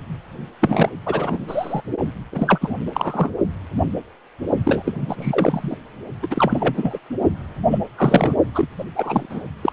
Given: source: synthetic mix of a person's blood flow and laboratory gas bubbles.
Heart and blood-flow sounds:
Doppler ultrasound of blood flow; precordium
0.60-0.90 s: bubbles
1.05-1.40 s: bubbles
1.47-1.81 s: bubbles
2.32-2.75 s: bubbles
2.86-2.91 s: bubbles
2.94-3.31 s: bubbles
4.64-5.76 s: bubbles
6.22-6.27 s: bubbles
6.30-6.99 s: bubbles
7.71-7.79 s: bubbles
7.97-8.35 s: bubbles
8.55-8.68 s: bubbles
8.78-8.85 s: bubbles
8.96-9.26 s: bubbles
9.30-9.45 s: bubbles
9.62-9.73 s: bubbles
From the record:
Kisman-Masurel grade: 333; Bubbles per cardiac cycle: rolling drumbeat, 9 or more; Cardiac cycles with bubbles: 50 to 99%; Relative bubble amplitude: loud (0.450 to 0.775); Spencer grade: 3 (all of the cardiac periods contain showers or single bubble signals, but not dominating or overriding the cardiac motion signals); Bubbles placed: only in the low amplitude regions of the cardiac cycle

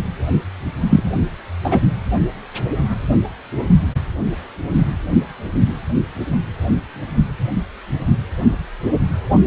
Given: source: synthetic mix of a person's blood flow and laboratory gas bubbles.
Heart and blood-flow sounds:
Doppler ultrasound of blood flow; precordium
0.90-1.04 s: bubbles
1.64-1.82 s: bubbles
From the record:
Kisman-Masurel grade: 213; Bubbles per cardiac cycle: several, 3 to 8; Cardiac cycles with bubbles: 1 to 10%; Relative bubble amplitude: loud (0.450 to 0.775); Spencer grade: 1 (occasional bubble signal discernible with the cardiac motion signal, with majority of cardiac periods free of bubbles); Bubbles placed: anywhere in the cardiac cycle

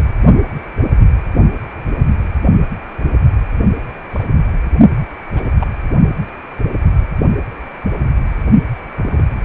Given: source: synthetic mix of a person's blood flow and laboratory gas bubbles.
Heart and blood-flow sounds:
Doppler ultrasound of blood flow; precordium
4.12-4.24 s: bubbles
5.34-5.49 s: bubbles
5.60-5.67 s: bubbles
8.97-9.23 s: bubbles
From the record:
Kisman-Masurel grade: 122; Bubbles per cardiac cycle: 1 to 2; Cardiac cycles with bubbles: 10 to 50%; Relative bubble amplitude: moderate (0.250 to 0.450); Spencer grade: 2 (many but less than half of the cardiac periods contain bubble signals, singularly or in groups); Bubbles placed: only in the low amplitude regions of the cardiac cycle

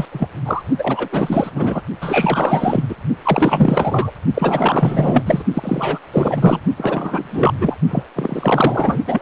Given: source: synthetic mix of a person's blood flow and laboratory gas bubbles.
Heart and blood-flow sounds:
Doppler ultrasound of blood flow; precordium
0.00-0.06 s: bubbles
0.12-0.28 s: bubbles
0.45-0.63 s: bubbles
0.78-1.09 s: bubbles
1.11-1.51 s: bubbles
1.55-1.82 s: bubbles
2.01-2.84 s: bubbles
2.88-2.96 s: bubbles
3.24-4.12 s: bubbles
4.34-5.23 s: bubbles
5.26-5.42 s: bubbles
5.54-5.98 s: bubbles
6.12-6.62 s: bubbles
6.77-7.54 s: bubbles
7.58-7.75 s: bubbles
7.90-8.03 s: bubbles
8.15-8.99 s: bubbles
9.07-9.22 s: bubbles
From the record:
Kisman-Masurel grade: 444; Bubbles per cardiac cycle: continuous sound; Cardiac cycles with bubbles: 100%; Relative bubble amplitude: maximal (0.775 to 0.999); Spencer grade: 4 (maximum detectable bubble signal sounding continuously throughout systole and diastole of every cardiac period, and overriding the amplitude of the normal cardiac signals); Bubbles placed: only in the low amplitude regions of the cardiac cycle

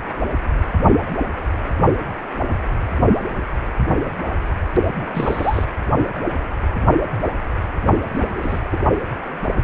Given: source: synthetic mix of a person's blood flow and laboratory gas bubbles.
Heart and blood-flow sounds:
Doppler ultrasound of blood flow; precordium
4.99-5.06 s: bubbles
5.14-5.64 s: bubbles
8.15-8.60 s: bubbles
8.71-8.78 s: bubbles
From the record:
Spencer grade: 2 (many but less than half of the cardiac periods contain bubble signals, singularly or in groups); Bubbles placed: only in the low amplitude regions of the cardiac cycle

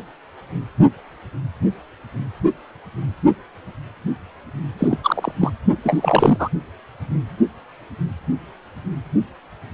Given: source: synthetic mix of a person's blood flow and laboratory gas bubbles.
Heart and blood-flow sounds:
Doppler ultrasound of blood flow; precordium
4.79-4.99 s: bubbles
5.03-5.32 s: bubbles
5.41-5.52 s: bubbles
5.83-6.49 s: bubbles
From the record:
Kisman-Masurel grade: 223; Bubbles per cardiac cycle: several, 3 to 8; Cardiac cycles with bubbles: 10 to 50%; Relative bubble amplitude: loud (0.450 to 0.775); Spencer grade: 2 (many but less than half of the cardiac periods contain bubble signals, singularly or in groups); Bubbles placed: only in the low amplitude regions of the cardiac cycle

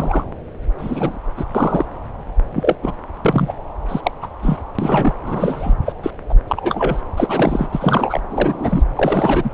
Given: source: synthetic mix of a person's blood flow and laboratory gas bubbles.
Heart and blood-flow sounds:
Doppler ultrasound of blood flow; subclavian vein
0.00-0.23 s: bubbles
0.78-1.18 s: bubbles
1.37-1.44 s: bubbles
1.54-1.85 s: bubbles
2.52-2.75 s: bubbles
2.82-2.92 s: bubbles
3.25-3.54 s: bubbles
3.88-4.12 s: bubbles
4.22-4.28 s: bubbles
4.42-4.58 s: bubbles
4.79-5.14 s: bubbles
5.23-5.74 s: bubbles
5.85-5.93 s: bubbles
6.03-6.10 s: bubbles
6.29-6.34 s: bubbles
6.47-7.02 s: bubbles
7.17-7.68 s: bubbles
7.72-8.21 s: bubbles
8.30-8.83 s: bubbles
8.96-9.51 s: bubbles
From the record:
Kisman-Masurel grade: 242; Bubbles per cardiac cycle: several, 3 to 8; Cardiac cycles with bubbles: 100%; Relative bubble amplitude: moderate (0.250 to 0.450); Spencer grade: 3 (all of the cardiac periods contain showers or single bubble signals, but not dominating or overriding the cardiac motion signals); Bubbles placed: anywhere in the cardiac cycle

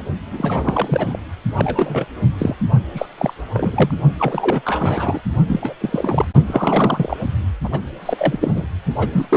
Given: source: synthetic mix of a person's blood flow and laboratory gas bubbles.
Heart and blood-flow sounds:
Doppler ultrasound of blood flow; precordium
0.30-1.19 s: bubbles
1.56-2.06 s: bubbles
2.38-2.56 s: bubbles
2.94-3.06 s: bubbles
3.17-3.33 s: bubbles
3.54-3.95 s: bubbles
4.19-4.62 s: bubbles
4.64-5.21 s: bubbles
5.46-5.75 s: bubbles
5.80-6.25 s: bubbles
6.46-7.17 s: bubbles
7.64-7.69 s: bubbles
7.72-7.80 s: bubbles
8.06-8.67 s: bubbles
8.98-9.09 s: bubbles
9.12-9.26 s: bubbles
9.29-9.37 s: bubbles
From the record:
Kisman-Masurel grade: 342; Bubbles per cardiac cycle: rolling drumbeat, 9 or more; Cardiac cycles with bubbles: 100%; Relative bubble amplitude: moderate (0.250 to 0.450); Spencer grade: 3 (all of the cardiac periods contain showers or single bubble signals, but not dominating or overriding the cardiac motion signals); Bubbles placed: only in the low amplitude regions of the cardiac cycle

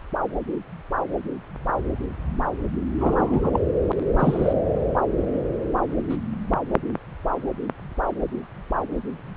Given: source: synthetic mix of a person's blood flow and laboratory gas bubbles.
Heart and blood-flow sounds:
Doppler ultrasound of blood flow; subclavian vein
3.00-3.60 s: bubbles
4.19-4.54 s: bubbles
6.09-6.17 s: bubbles
From the record:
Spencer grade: 2 (many but less than half of the cardiac periods contain bubble signals, singularly or in groups); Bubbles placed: anywhere in the cardiac cycle

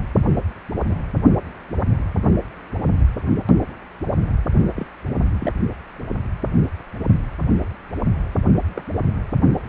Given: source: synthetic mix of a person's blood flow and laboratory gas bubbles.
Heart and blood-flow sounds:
Doppler ultrasound of blood flow; precordium
0.88-0.96 s: bubbles
4.76-4.87 s: bubbles
5.39-5.53 s: bubbles
8.74-8.84 s: bubbles
From the record:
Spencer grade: 2 (many but less than half of the cardiac periods contain bubble signals, singularly or in groups); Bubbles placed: only in the low amplitude regions of the cardiac cycle

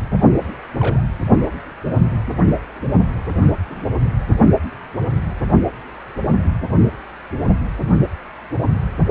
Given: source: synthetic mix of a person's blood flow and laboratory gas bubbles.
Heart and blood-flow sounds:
Doppler ultrasound of blood flow; precordium
0.74-1.03 s: bubbles
2.39-2.48 s: bubbles
3.66-3.85 s: bubbles
From the record:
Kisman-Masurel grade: 121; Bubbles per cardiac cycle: 1 to 2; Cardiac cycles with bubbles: 10 to 50%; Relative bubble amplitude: barely perceptible (0.100 to 0.250); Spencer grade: 2 (many but less than half of the cardiac periods contain bubble signals, singularly or in groups); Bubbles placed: only in the low amplitude regions of the cardiac cycle

